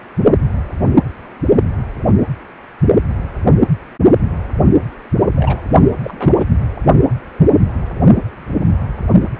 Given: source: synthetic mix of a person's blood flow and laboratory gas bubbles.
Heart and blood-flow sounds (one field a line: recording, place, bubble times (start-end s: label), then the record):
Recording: Doppler ultrasound of blood flow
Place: precordium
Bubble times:
5.35-5.61 s: bubbles
6.02-6.47 s: bubbles
From the record:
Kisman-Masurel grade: 212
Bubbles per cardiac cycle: several, 3 to 8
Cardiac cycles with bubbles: 1 to 10%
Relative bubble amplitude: moderate (0.250 to 0.450)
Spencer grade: 1 (occasional bubble signal discernible with the cardiac motion signal, with majority of cardiac periods free of bubbles)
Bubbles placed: only in the low amplitude regions of the cardiac cycle